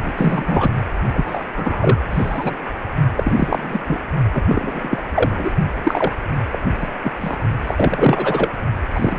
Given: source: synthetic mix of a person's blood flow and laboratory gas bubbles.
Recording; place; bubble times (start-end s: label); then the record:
Doppler ultrasound of blood flow; precordium
0.04-0.13 s: bubbles
0.16-0.70 s: bubbles
1.13-1.44 s: bubbles
1.56-1.98 s: bubbles
2.10-2.55 s: bubbles
3.17-3.81 s: bubbles
3.88-3.99 s: bubbles
4.33-4.42 s: bubbles
4.48-5.02 s: bubbles
5.15-5.53 s: bubbles
5.83-6.12 s: bubbles
6.51-6.59 s: bubbles
6.80-6.90 s: bubbles
7.03-7.11 s: bubbles
7.21-7.37 s: bubbles
7.66-8.52 s: bubbles
8.96-9.19 s: bubbles
From the record:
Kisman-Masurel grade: 343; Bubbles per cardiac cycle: rolling drumbeat, 9 or more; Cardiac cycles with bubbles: 100%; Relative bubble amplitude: loud (0.450 to 0.775); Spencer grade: 3 (all of the cardiac periods contain showers or single bubble signals, but not dominating or overriding the cardiac motion signals); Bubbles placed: only in the low amplitude regions of the cardiac cycle